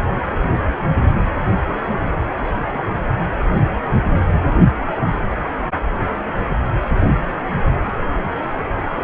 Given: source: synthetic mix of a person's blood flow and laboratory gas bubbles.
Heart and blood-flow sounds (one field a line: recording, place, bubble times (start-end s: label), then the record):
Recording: Doppler ultrasound of blood flow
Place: precordium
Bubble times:
no bubbles
From the record:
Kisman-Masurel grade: 000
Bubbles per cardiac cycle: 0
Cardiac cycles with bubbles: 0%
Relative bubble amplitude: no bubbles discernible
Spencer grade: 0 (complete lack of bubble signals)